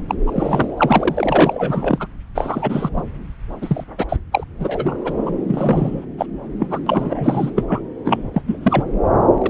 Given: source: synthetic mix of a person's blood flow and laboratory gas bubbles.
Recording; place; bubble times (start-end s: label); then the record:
Doppler ultrasound of blood flow; subclavian vein
0.08-0.15 s: bubbles
0.26-2.07 s: bubbles
2.35-2.90 s: bubbles
2.97-3.02 s: bubbles
3.62-3.84 s: bubbles
3.98-4.05 s: bubbles
4.08-4.17 s: bubbles
4.32-4.44 s: bubbles
4.59-5.12 s: bubbles
5.25-5.30 s: bubbles
5.48-6.05 s: bubbles
6.18-6.26 s: bubbles
6.59-6.67 s: bubbles
6.70-6.79 s: bubbles
6.87-7.50 s: bubbles
7.56-7.82 s: bubbles
8.04-8.29 s: bubbles
8.34-8.42 s: bubbles
8.47-8.57 s: bubbles
8.62-8.85 s: bubbles
9.38-9.50 s: bubbles
From the record:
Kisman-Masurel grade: 342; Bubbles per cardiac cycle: rolling drumbeat, 9 or more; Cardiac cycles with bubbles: 100%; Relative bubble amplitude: moderate (0.250 to 0.450); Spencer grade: 3 (all of the cardiac periods contain showers or single bubble signals, but not dominating or overriding the cardiac motion signals); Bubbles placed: anywhere in the cardiac cycle